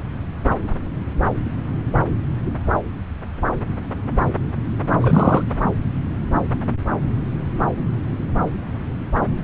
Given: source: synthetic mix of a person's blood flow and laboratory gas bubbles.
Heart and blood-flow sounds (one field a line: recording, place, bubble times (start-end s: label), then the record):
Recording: Doppler ultrasound of blood flow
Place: subclavian vein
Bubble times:
4.98-5.44 s: bubbles
From the record:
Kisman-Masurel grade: 213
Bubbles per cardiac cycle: several, 3 to 8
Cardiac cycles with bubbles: 1 to 10%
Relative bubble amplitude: loud (0.450 to 0.775)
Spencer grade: 1 (occasional bubble signal discernible with the cardiac motion signal, with majority of cardiac periods free of bubbles)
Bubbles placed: anywhere in the cardiac cycle